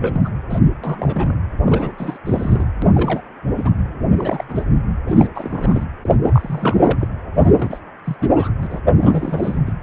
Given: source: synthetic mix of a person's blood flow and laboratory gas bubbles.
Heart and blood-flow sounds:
Doppler ultrasound of blood flow; precordium
0.00-0.29 s: bubbles
0.49-0.59 s: bubbles
0.84-1.39 s: bubbles
1.64-2.18 s: bubbles
2.25-2.70 s: bubbles
2.82-2.86 s: bubbles
2.94-3.21 s: bubbles
3.44-3.71 s: bubbles
4.10-4.45 s: bubbles
4.49-4.64 s: bubbles
5.06-5.28 s: bubbles
5.35-5.84 s: bubbles
6.03-7.08 s: bubbles
7.35-7.80 s: bubbles
8.04-8.16 s: bubbles
8.20-8.52 s: bubbles
8.62-8.67 s: bubbles
8.70-8.80 s: bubbles
8.93-9.57 s: bubbles
9.66-9.73 s: bubbles
From the record:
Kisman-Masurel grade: 342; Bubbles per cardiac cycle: rolling drumbeat, 9 or more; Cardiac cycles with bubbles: 100%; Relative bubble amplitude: moderate (0.250 to 0.450); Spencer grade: 3 (all of the cardiac periods contain showers or single bubble signals, but not dominating or overriding the cardiac motion signals); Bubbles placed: anywhere in the cardiac cycle

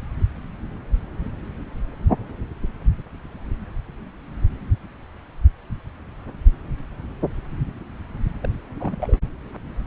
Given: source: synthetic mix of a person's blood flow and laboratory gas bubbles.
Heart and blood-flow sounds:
Doppler ultrasound of blood flow; subclavian vein
8.40-8.48 s: bubbles
8.79-9.19 s: bubbles
From the record:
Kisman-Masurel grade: 211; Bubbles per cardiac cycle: several, 3 to 8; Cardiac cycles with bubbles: 1 to 10%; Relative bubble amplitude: barely perceptible (0.100 to 0.250); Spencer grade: 1 (occasional bubble signal discernible with the cardiac motion signal, with majority of cardiac periods free of bubbles); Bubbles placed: anywhere in the cardiac cycle

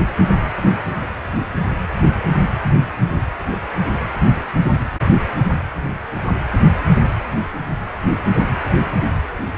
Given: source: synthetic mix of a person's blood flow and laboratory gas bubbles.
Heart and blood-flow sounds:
Doppler ultrasound of blood flow; precordium
no bubbles
From the record:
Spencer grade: 0 (complete lack of bubble signals)

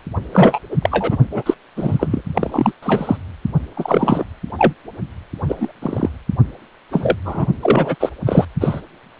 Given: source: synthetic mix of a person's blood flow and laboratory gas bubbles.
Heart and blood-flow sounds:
Doppler ultrasound of blood flow; precordium
0.33-0.59 s: bubbles
0.70-0.76 s: bubbles
0.81-1.18 s: bubbles
1.31-1.43 s: bubbles
1.45-1.54 s: bubbles
1.76-2.22 s: bubbles
2.35-2.72 s: bubbles
2.83-3.17 s: bubbles
3.77-4.25 s: bubbles
4.58-4.73 s: bubbles
5.42-5.72 s: bubbles
5.81-6.09 s: bubbles
6.91-7.16 s: bubbles
7.25-7.46 s: bubbles
7.61-7.96 s: bubbles
8.00-8.09 s: bubbles
8.26-8.45 s: bubbles
8.61-8.80 s: bubbles
From the record:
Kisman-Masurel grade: 243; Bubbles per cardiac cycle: several, 3 to 8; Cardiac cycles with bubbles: 100%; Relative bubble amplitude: loud (0.450 to 0.775); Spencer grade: 3 (all of the cardiac periods contain showers or single bubble signals, but not dominating or overriding the cardiac motion signals); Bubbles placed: only in the low amplitude regions of the cardiac cycle

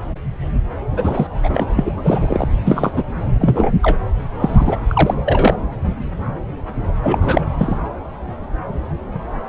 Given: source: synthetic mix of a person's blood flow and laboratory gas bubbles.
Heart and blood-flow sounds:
Doppler ultrasound of blood flow; subclavian vein
0.91-1.27 s: bubbles
1.43-1.67 s: bubbles
1.76-1.91 s: bubbles
1.97-2.48 s: bubbles
2.65-2.92 s: bubbles
2.94-3.03 s: bubbles
3.40-3.71 s: bubbles
3.82-3.98 s: bubbles
4.40-4.77 s: bubbles
4.88-5.14 s: bubbles
5.25-5.56 s: bubbles
7.03-7.19 s: bubbles
7.21-7.45 s: bubbles
7.58-7.78 s: bubbles
From the record:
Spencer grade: 3 (all of the cardiac periods contain showers or single bubble signals, but not dominating or overriding the cardiac motion signals); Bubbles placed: anywhere in the cardiac cycle

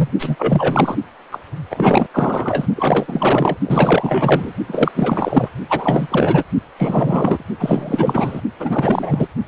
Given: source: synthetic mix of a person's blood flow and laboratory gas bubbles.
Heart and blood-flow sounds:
Doppler ultrasound of blood flow; precordium
0.00-0.09 s: bubbles
0.19-0.35 s: bubbles
0.38-0.96 s: bubbles
1.32-1.41 s: bubbles
1.70-2.06 s: bubbles
2.13-2.67 s: bubbles
2.75-3.57 s: bubbles
3.67-4.52 s: bubbles
4.67-4.91 s: bubbles
4.94-5.49 s: bubbles
5.69-6.43 s: bubbles
6.78-7.45 s: bubbles
7.59-8.41 s: bubbles
8.59-9.27 s: bubbles
9.46-9.48 s: bubbles
From the record:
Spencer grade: 4 (maximum detectable bubble signal sounding continuously throughout systole and diastole of every cardiac period, and overriding the amplitude of the normal cardiac signals); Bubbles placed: only in the low amplitude regions of the cardiac cycle

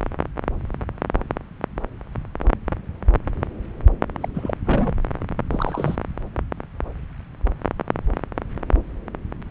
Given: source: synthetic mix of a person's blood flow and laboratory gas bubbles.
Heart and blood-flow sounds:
Doppler ultrasound of blood flow; subclavian vein
4.21-4.29 s: bubbles
4.34-4.54 s: bubbles
4.65-4.95 s: bubbles
5.50-5.96 s: bubbles
From the record:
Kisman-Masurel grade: 221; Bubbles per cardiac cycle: several, 3 to 8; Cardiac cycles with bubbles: 10 to 50%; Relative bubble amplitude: barely perceptible (0.100 to 0.250); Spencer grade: 2 (many but less than half of the cardiac periods contain bubble signals, singularly or in groups); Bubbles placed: anywhere in the cardiac cycle

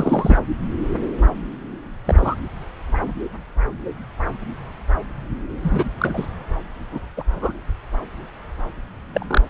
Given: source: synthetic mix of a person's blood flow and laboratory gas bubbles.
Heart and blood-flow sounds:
Doppler ultrasound of blood flow; subclavian vein
0.00-0.38 s: bubbles
2.05-2.41 s: bubbles
5.62-5.90 s: bubbles
5.98-6.27 s: bubbles
6.92-7.00 s: bubbles
7.17-7.24 s: bubbles
7.32-7.53 s: bubbles
9.13-9.42 s: bubbles
From the record:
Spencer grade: 3 (all of the cardiac periods contain showers or single bubble signals, but not dominating or overriding the cardiac motion signals); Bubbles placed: anywhere in the cardiac cycle

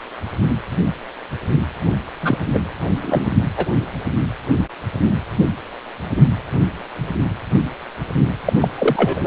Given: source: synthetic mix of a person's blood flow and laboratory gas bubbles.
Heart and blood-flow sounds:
Doppler ultrasound of blood flow; precordium
2.21-2.37 s: bubbles
2.54-2.60 s: bubbles
3.02-3.27 s: bubbles
3.57-3.66 s: bubbles
8.45-8.53 s: bubbles
8.60-8.68 s: bubbles
8.78-9.26 s: bubbles
From the record:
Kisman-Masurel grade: 223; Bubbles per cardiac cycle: several, 3 to 8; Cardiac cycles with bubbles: 10 to 50%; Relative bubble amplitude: loud (0.450 to 0.775); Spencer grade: 2 (many but less than half of the cardiac periods contain bubble signals, singularly or in groups); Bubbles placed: anywhere in the cardiac cycle

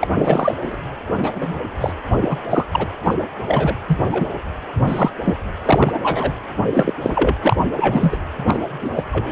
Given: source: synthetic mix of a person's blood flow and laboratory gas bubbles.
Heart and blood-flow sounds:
Doppler ultrasound of blood flow; precordium
0.00-0.08 s: bubbles
0.18-0.54 s: bubbles
0.61-0.76 s: bubbles
1.23-1.60 s: bubbles
1.80-1.93 s: bubbles
2.21-2.38 s: bubbles
2.49-2.67 s: bubbles
2.71-2.92 s: bubbles
3.03-3.14 s: bubbles
3.47-3.76 s: bubbles
3.88-4.00 s: bubbles
4.09-4.29 s: bubbles
4.84-5.10 s: bubbles
5.24-5.34 s: bubbles
5.65-5.99 s: bubbles
6.02-6.33 s: bubbles
6.70-6.92 s: bubbles
7.00-7.34 s: bubbles
7.42-7.56 s: bubbles
7.76-8.18 s: bubbles
8.47-8.59 s: bubbles
8.81-8.91 s: bubbles
8.96-9.04 s: bubbles
9.12-9.32 s: bubbles
From the record:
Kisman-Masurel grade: 243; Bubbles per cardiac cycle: several, 3 to 8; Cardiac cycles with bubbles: 100%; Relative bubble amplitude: loud (0.450 to 0.775); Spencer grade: 3 (all of the cardiac periods contain showers or single bubble signals, but not dominating or overriding the cardiac motion signals); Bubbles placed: anywhere in the cardiac cycle

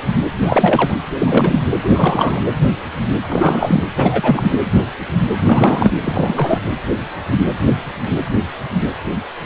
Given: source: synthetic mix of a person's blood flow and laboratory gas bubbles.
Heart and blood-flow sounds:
Doppler ultrasound of blood flow; precordium
0.42-0.97 s: bubbles
1.18-1.62 s: bubbles
1.84-1.89 s: bubbles
1.94-2.41 s: bubbles
3.29-3.84 s: bubbles
3.95-4.58 s: bubbles
5.44-5.90 s: bubbles
6.01-6.59 s: bubbles
From the record:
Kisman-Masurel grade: 333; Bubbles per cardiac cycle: rolling drumbeat, 9 or more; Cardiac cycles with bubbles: 50 to 99%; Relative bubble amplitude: loud (0.450 to 0.775); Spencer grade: 3 (all of the cardiac periods contain showers or single bubble signals, but not dominating or overriding the cardiac motion signals); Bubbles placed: anywhere in the cardiac cycle

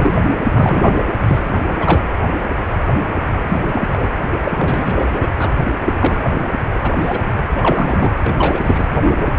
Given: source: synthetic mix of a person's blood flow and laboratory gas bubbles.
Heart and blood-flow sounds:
Doppler ultrasound of blood flow; precordium
0.00-0.26 s: bubbles
0.52-1.02 s: bubbles
1.27-1.43 s: bubbles
1.67-2.01 s: bubbles
3.49-3.61 s: bubbles
3.73-4.09 s: bubbles
4.44-4.52 s: bubbles
4.58-5.28 s: bubbles
5.38-5.49 s: bubbles
5.99-6.17 s: bubbles
6.83-6.92 s: bubbles
6.98-7.21 s: bubbles
7.55-8.15 s: bubbles
8.23-8.60 s: bubbles
8.64-8.87 s: bubbles
From the record:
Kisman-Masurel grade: 233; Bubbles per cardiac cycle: several, 3 to 8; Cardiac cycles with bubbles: 50 to 99%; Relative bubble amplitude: loud (0.450 to 0.775); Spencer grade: 3 (all of the cardiac periods contain showers or single bubble signals, but not dominating or overriding the cardiac motion signals); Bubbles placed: anywhere in the cardiac cycle

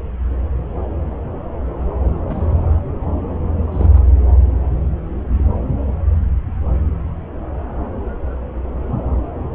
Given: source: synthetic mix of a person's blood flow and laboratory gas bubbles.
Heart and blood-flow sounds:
Doppler ultrasound of blood flow; subclavian vein
2.29-2.67 s: bubbles
3.72-4.00 s: bubbles
From the record:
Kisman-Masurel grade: 121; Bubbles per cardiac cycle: 1 to 2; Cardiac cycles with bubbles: 10 to 50%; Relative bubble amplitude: barely perceptible (0.100 to 0.250); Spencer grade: 2 (many but less than half of the cardiac periods contain bubble signals, singularly or in groups); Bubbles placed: anywhere in the cardiac cycle

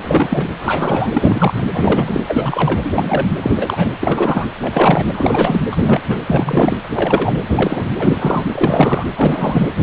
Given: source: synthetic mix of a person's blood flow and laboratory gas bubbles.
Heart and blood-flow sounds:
Doppler ultrasound of blood flow; precordium
0.02-0.49 s: bubbles
0.58-1.10 s: bubbles
1.12-1.68 s: bubbles
1.72-2.23 s: bubbles
2.28-2.81 s: bubbles
2.84-3.28 s: bubbles
3.42-3.90 s: bubbles
4.01-4.46 s: bubbles
4.61-5.06 s: bubbles
5.12-5.63 s: bubbles
5.71-6.01 s: bubbles
6.08-6.20 s: bubbles
6.26-6.77 s: bubbles
6.91-7.41 s: bubbles
7.49-7.91 s: bubbles
7.99-8.46 s: bubbles
8.52-9.05 s: bubbles
9.15-9.68 s: bubbles
From the record:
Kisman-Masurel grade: 343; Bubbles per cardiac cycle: rolling drumbeat, 9 or more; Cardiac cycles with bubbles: 100%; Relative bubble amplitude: loud (0.450 to 0.775); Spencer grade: 3 (all of the cardiac periods contain showers or single bubble signals, but not dominating or overriding the cardiac motion signals); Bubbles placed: anywhere in the cardiac cycle

